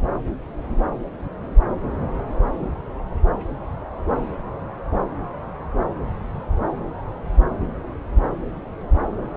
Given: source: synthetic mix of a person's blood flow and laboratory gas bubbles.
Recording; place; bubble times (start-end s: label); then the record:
Doppler ultrasound of blood flow; subclavian vein
no bubbles
From the record:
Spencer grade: 0 (complete lack of bubble signals)